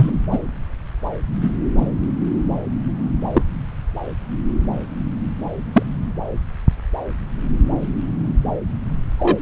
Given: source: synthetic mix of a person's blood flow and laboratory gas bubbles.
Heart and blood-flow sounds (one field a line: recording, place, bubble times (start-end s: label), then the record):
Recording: Doppler ultrasound of blood flow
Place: subclavian vein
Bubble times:
0.00-0.10 s: bubbles
0.31-0.38 s: bubbles
1.41-1.50 s: bubbles
1.76-1.86 s: bubbles
3.33-3.42 s: bubbles
5.73-5.83 s: bubbles
9.17-9.42 s: bubbles
From the record:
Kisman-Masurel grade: 123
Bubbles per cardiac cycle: 1 to 2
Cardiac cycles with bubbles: 10 to 50%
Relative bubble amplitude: loud (0.450 to 0.775)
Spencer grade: 2 (many but less than half of the cardiac periods contain bubble signals, singularly or in groups)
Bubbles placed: anywhere in the cardiac cycle